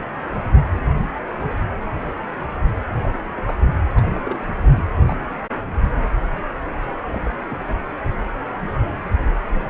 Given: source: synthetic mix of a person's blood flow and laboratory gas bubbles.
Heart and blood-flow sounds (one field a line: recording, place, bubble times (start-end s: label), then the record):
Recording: Doppler ultrasound of blood flow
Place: precordium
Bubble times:
0.00-0.05 s: bubbles
0.19-0.45 s: bubbles
3.04-3.20 s: bubbles
3.34-3.63 s: bubbles
3.95-4.54 s: bubbles
4.70-4.85 s: bubbles
4.96-5.02 s: bubbles
5.09-5.17 s: bubbles
7.07-7.23 s: bubbles
7.25-7.29 s: bubbles
7.50-7.62 s: bubbles
From the record:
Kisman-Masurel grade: 221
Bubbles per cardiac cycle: several, 3 to 8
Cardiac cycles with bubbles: 10 to 50%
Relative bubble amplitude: barely perceptible (0.100 to 0.250)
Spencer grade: 2 (many but less than half of the cardiac periods contain bubble signals, singularly or in groups)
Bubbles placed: anywhere in the cardiac cycle